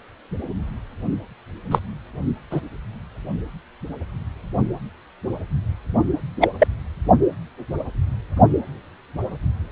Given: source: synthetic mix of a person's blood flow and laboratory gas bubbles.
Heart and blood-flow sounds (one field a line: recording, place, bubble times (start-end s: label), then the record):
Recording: Doppler ultrasound of blood flow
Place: precordium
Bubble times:
1.71-1.79 s: bubbles
2.50-2.61 s: bubbles
6.40-6.50 s: bubbles
6.58-6.67 s: bubbles
From the record:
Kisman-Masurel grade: 123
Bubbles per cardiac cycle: 1 to 2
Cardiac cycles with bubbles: 10 to 50%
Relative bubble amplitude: loud (0.450 to 0.775)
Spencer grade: 2 (many but less than half of the cardiac periods contain bubble signals, singularly or in groups)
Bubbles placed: only in the low amplitude regions of the cardiac cycle